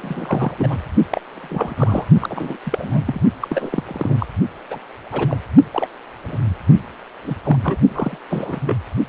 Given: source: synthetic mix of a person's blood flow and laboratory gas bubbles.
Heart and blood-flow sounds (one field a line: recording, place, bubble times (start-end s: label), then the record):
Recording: Doppler ultrasound of blood flow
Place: precordium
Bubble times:
0.00-0.55 s: bubbles
0.58-0.83 s: bubbles
1.11-1.21 s: bubbles
1.31-1.74 s: bubbles
1.76-2.05 s: bubbles
2.20-2.57 s: bubbles
2.63-3.21 s: bubbles
3.42-3.83 s: bubbles
3.87-4.26 s: bubbles
4.70-4.79 s: bubbles
5.12-5.37 s: bubbles
5.71-5.88 s: bubbles
6.23-6.39 s: bubbles
7.24-7.36 s: bubbles
7.44-7.58 s: bubbles
7.63-7.76 s: bubbles
7.88-8.17 s: bubbles
8.30-8.60 s: bubbles
8.66-8.76 s: bubbles
From the record:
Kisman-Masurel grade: 242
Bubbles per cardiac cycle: several, 3 to 8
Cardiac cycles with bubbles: 100%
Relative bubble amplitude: moderate (0.250 to 0.450)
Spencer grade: 3 (all of the cardiac periods contain showers or single bubble signals, but not dominating or overriding the cardiac motion signals)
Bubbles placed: only in the low amplitude regions of the cardiac cycle